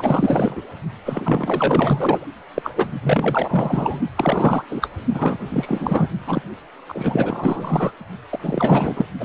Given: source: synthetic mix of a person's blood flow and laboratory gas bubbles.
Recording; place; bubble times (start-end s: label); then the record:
Doppler ultrasound of blood flow; precordium
0.00-0.62 s: bubbles
1.05-2.29 s: bubbles
2.54-2.71 s: bubbles
2.75-2.92 s: bubbles
3.02-4.00 s: bubbles
4.16-4.64 s: bubbles
4.71-4.89 s: bubbles
5.13-5.39 s: bubbles
5.49-6.09 s: bubbles
6.27-6.42 s: bubbles
6.88-7.92 s: bubbles
8.29-9.05 s: bubbles
9.20-9.25 s: bubbles
From the record:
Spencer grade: 4 (maximum detectable bubble signal sounding continuously throughout systole and diastole of every cardiac period, and overriding the amplitude of the normal cardiac signals); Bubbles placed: only in the low amplitude regions of the cardiac cycle